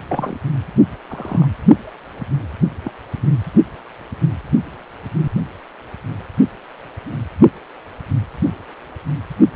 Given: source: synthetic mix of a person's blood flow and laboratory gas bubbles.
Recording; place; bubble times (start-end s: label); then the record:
Doppler ultrasound of blood flow; precordium
0.09-0.36 s: bubbles
1.09-1.47 s: bubbles
2.84-2.93 s: bubbles
From the record:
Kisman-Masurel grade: 122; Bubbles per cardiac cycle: 1 to 2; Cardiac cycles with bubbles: 10 to 50%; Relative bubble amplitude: moderate (0.250 to 0.450); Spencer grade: 2 (many but less than half of the cardiac periods contain bubble signals, singularly or in groups); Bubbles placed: only in the low amplitude regions of the cardiac cycle